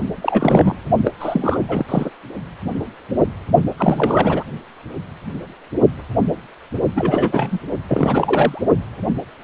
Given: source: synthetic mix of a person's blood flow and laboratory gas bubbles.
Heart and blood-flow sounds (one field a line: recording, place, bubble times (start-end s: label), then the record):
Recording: Doppler ultrasound of blood flow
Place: precordium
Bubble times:
0.22-0.75 s: bubbles
1.05-1.11 s: bubbles
1.20-1.59 s: bubbles
1.68-2.10 s: bubbles
3.77-4.43 s: bubbles
6.96-7.60 s: bubbles
7.87-8.62 s: bubbles
From the record:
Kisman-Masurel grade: 332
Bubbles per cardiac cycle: rolling drumbeat, 9 or more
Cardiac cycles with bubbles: 50 to 99%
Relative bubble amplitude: moderate (0.250 to 0.450)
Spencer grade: 3 (all of the cardiac periods contain showers or single bubble signals, but not dominating or overriding the cardiac motion signals)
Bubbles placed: only in the low amplitude regions of the cardiac cycle